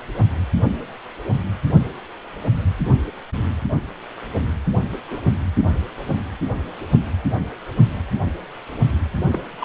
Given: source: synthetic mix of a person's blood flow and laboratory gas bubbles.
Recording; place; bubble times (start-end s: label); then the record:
Doppler ultrasound of blood flow; precordium
5.11-5.18 s: bubbles
9.29-9.41 s: bubbles
9.60-9.65 s: bubbles
From the record:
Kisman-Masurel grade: 121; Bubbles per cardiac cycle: 1 to 2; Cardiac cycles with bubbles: 10 to 50%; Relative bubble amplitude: barely perceptible (0.100 to 0.250); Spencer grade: 2 (many but less than half of the cardiac periods contain bubble signals, singularly or in groups); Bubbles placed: only in the low amplitude regions of the cardiac cycle